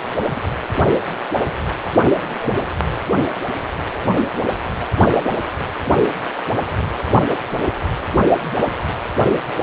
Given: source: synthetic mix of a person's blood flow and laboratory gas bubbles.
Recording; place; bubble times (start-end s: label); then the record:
Doppler ultrasound of blood flow; precordium
0.21-0.40 s: bubbles
2.03-2.71 s: bubbles
From the record:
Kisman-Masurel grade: 221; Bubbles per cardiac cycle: several, 3 to 8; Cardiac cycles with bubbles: 10 to 50%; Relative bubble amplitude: barely perceptible (0.100 to 0.250); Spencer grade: 2 (many but less than half of the cardiac periods contain bubble signals, singularly or in groups); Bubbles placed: only in the low amplitude regions of the cardiac cycle